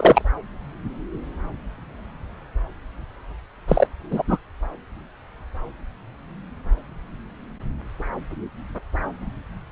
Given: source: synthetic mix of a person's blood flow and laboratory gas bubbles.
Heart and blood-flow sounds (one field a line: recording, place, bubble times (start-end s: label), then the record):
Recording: Doppler ultrasound of blood flow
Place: subclavian vein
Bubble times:
0.00-0.22 s: bubbles
3.68-3.87 s: bubbles
4.11-4.22 s: bubbles
4.27-4.38 s: bubbles
From the record:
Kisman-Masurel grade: 123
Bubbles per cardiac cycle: 1 to 2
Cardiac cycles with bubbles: 10 to 50%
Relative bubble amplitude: loud (0.450 to 0.775)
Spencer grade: 2 (many but less than half of the cardiac periods contain bubble signals, singularly or in groups)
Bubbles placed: anywhere in the cardiac cycle